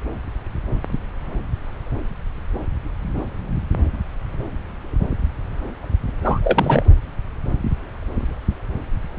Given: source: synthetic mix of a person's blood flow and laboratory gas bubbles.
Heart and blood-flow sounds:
Doppler ultrasound of blood flow; subclavian vein
6.23-6.39 s: bubbles
6.43-6.83 s: bubbles
From the record:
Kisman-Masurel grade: 212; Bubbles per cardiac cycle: several, 3 to 8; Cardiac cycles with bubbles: 1 to 10%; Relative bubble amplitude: moderate (0.250 to 0.450); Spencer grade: 1 (occasional bubble signal discernible with the cardiac motion signal, with majority of cardiac periods free of bubbles); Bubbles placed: anywhere in the cardiac cycle

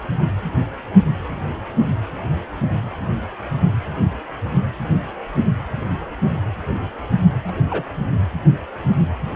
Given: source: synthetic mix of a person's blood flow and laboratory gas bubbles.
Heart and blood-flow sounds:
Doppler ultrasound of blood flow; precordium
7.47-7.52 s: bubbles
7.70-7.85 s: bubbles
From the record:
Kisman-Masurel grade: 112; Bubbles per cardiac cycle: 1 to 2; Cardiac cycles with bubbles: 1 to 10%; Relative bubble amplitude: moderate (0.250 to 0.450); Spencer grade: 1 (occasional bubble signal discernible with the cardiac motion signal, with majority of cardiac periods free of bubbles); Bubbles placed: anywhere in the cardiac cycle

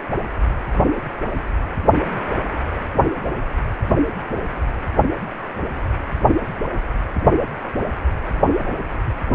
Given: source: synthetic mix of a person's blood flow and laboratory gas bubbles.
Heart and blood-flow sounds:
Doppler ultrasound of blood flow; precordium
no bubbles
From the record:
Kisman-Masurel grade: 000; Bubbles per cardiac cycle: 0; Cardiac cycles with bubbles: 0%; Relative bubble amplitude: no bubbles discernible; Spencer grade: 0 (complete lack of bubble signals)

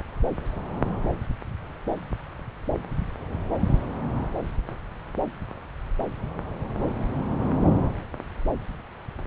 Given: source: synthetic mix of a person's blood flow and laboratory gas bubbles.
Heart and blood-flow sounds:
Doppler ultrasound of blood flow; subclavian vein
no bubbles
From the record:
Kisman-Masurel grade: 000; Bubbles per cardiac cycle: 0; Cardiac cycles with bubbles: 0%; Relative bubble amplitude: no bubbles discernible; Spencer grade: 0 (complete lack of bubble signals)

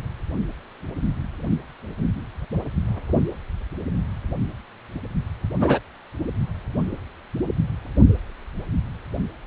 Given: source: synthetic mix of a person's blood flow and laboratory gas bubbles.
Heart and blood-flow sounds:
Doppler ultrasound of blood flow; precordium
5.58-5.79 s: bubbles
From the record:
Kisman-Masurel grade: 113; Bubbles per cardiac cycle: 1 to 2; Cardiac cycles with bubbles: 1 to 10%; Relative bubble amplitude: loud (0.450 to 0.775); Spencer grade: 1 (occasional bubble signal discernible with the cardiac motion signal, with majority of cardiac periods free of bubbles); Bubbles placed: only in the low amplitude regions of the cardiac cycle

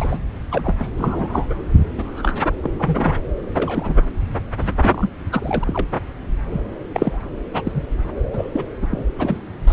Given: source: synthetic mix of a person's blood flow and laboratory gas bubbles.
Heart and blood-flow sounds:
Doppler ultrasound of blood flow; subclavian vein
0.00-0.18 s: bubbles
0.51-0.90 s: bubbles
0.97-1.47 s: bubbles
1.50-1.54 s: bubbles
1.97-2.38 s: bubbles
2.43-2.48 s: bubbles
2.63-2.70 s: bubbles
2.78-3.15 s: bubbles
3.54-3.94 s: bubbles
4.60-4.71 s: bubbles
4.81-5.10 s: bubbles
5.32-5.64 s: bubbles
5.67-5.87 s: bubbles
6.50-6.62 s: bubbles
6.94-7.23 s: bubbles
7.54-7.62 s: bubbles
7.65-7.82 s: bubbles
8.32-8.64 s: bubbles
8.82-8.88 s: bubbles
8.90-9.05 s: bubbles
9.18-9.38 s: bubbles
9.67-9.73 s: bubbles
From the record:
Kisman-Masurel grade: 242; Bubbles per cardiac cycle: several, 3 to 8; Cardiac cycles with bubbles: 100%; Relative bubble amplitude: moderate (0.250 to 0.450); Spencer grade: 3 (all of the cardiac periods contain showers or single bubble signals, but not dominating or overriding the cardiac motion signals); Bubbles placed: anywhere in the cardiac cycle

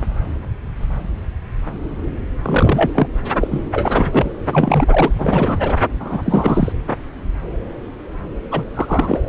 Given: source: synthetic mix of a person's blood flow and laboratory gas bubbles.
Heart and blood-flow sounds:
Doppler ultrasound of blood flow; subclavian vein
2.43-2.92 s: bubbles
2.95-3.07 s: bubbles
3.36-3.48 s: bubbles
3.50-3.64 s: bubbles
3.74-4.30 s: bubbles
4.53-5.13 s: bubbles
5.18-5.75 s: bubbles
6.00-6.22 s: bubbles
6.25-6.73 s: bubbles
8.51-8.63 s: bubbles
8.74-9.20 s: bubbles
From the record:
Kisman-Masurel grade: 333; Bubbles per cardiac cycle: rolling drumbeat, 9 or more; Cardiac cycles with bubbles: 50 to 99%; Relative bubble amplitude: loud (0.450 to 0.775); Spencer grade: 3 (all of the cardiac periods contain showers or single bubble signals, but not dominating or overriding the cardiac motion signals); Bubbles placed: anywhere in the cardiac cycle

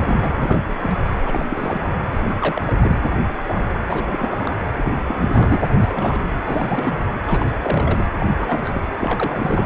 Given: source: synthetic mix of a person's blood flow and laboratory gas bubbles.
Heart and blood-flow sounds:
Doppler ultrasound of blood flow; precordium
0.00-0.27 s: bubbles
0.30-0.76 s: bubbles
0.81-1.00 s: bubbles
1.26-1.47 s: bubbles
1.50-1.93 s: bubbles
2.12-2.35 s: bubbles
2.39-2.74 s: bubbles
2.79-2.99 s: bubbles
3.48-3.65 s: bubbles
3.85-4.54 s: bubbles
4.75-4.92 s: bubbles
5.07-5.62 s: bubbles
5.74-5.76 s: bubbles
5.81-6.22 s: bubbles
6.46-6.98 s: bubbles
7.26-7.46 s: bubbles
7.62-8.06 s: bubbles
8.20-8.26 s: bubbles
8.37-8.80 s: bubbles
8.99-9.66 s: bubbles
From the record:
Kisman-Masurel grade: 342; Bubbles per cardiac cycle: rolling drumbeat, 9 or more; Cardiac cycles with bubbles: 100%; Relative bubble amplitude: moderate (0.250 to 0.450); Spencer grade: 3 (all of the cardiac periods contain showers or single bubble signals, but not dominating or overriding the cardiac motion signals); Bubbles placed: anywhere in the cardiac cycle

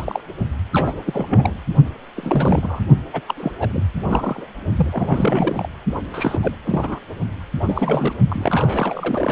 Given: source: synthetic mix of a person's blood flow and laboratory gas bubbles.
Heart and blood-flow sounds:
Doppler ultrasound of blood flow; precordium
0.00-0.22 s: bubbles
0.73-1.00 s: bubbles
1.04-1.55 s: bubbles
2.16-2.80 s: bubbles
3.12-3.21 s: bubbles
3.28-3.35 s: bubbles
3.37-3.52 s: bubbles
3.58-3.83 s: bubbles
4.08-4.47 s: bubbles
4.77-5.69 s: bubbles
6.13-6.55 s: bubbles
6.64-6.99 s: bubbles
7.66-8.14 s: bubbles
8.28-9.32 s: bubbles
From the record:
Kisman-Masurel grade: 342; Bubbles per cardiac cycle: rolling drumbeat, 9 or more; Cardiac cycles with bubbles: 100%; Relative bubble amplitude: moderate (0.250 to 0.450); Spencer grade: 3 (all of the cardiac periods contain showers or single bubble signals, but not dominating or overriding the cardiac motion signals); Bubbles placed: only in the low amplitude regions of the cardiac cycle

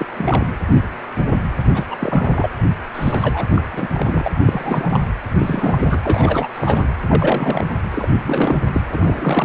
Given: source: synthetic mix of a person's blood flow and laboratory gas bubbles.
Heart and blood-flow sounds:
Doppler ultrasound of blood flow; precordium
0.00-0.53 s: bubbles
1.74-1.84 s: bubbles
1.91-1.97 s: bubbles
2.00-2.49 s: bubbles
2.94-3.47 s: bubbles
3.55-3.62 s: bubbles
3.72-3.88 s: bubbles
3.93-4.31 s: bubbles
4.40-5.00 s: bubbles
5.38-6.00 s: bubbles
6.03-6.47 s: bubbles
6.54-6.87 s: bubbles
7.08-7.66 s: bubbles
7.90-8.08 s: bubbles
8.23-8.57 s: bubbles
8.73-8.82 s: bubbles
8.90-9.45 s: bubbles
From the record:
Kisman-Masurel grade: 332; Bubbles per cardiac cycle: rolling drumbeat, 9 or more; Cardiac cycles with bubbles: 50 to 99%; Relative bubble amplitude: moderate (0.250 to 0.450); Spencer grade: 3 (all of the cardiac periods contain showers or single bubble signals, but not dominating or overriding the cardiac motion signals); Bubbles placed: anywhere in the cardiac cycle

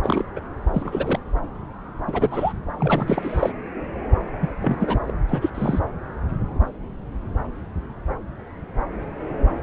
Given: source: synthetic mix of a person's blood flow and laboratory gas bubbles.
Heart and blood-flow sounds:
Doppler ultrasound of blood flow; subclavian vein
0.03-0.25 s: bubbles
0.36-0.40 s: bubbles
0.74-1.19 s: bubbles
2.07-2.53 s: bubbles
2.79-3.52 s: bubbles
4.41-4.49 s: bubbles
4.62-4.98 s: bubbles
5.07-5.12 s: bubbles
5.29-5.50 s: bubbles
5.54-5.81 s: bubbles
From the record:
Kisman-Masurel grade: 232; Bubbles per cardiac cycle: several, 3 to 8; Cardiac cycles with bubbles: 50 to 99%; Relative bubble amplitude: moderate (0.250 to 0.450); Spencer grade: 3 (all of the cardiac periods contain showers or single bubble signals, but not dominating or overriding the cardiac motion signals); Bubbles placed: anywhere in the cardiac cycle

